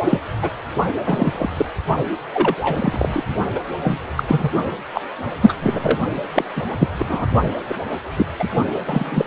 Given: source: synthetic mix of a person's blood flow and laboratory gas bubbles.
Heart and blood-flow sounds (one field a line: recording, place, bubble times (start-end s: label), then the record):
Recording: Doppler ultrasound of blood flow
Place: precordium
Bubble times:
0.04-0.18 s: bubbles
0.42-0.50 s: bubbles
1.06-1.50 s: bubbles
1.56-1.65 s: bubbles
2.33-2.54 s: bubbles
2.60-3.23 s: bubbles
3.55-3.60 s: bubbles
3.83-3.99 s: bubbles
4.16-4.24 s: bubbles
4.28-4.50 s: bubbles
4.94-5.01 s: bubbles
5.40-5.54 s: bubbles
5.61-5.99 s: bubbles
6.35-6.45 s: bubbles
6.56-6.65 s: bubbles
6.78-6.91 s: bubbles
6.99-7.06 s: bubbles
7.08-7.26 s: bubbles
7.68-7.75 s: bubbles
8.16-8.26 s: bubbles
8.38-8.50 s: bubbles
8.86-9.25 s: bubbles
From the record:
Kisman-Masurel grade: 243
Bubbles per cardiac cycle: several, 3 to 8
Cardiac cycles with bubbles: 100%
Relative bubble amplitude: loud (0.450 to 0.775)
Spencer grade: 3 (all of the cardiac periods contain showers or single bubble signals, but not dominating or overriding the cardiac motion signals)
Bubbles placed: only in the low amplitude regions of the cardiac cycle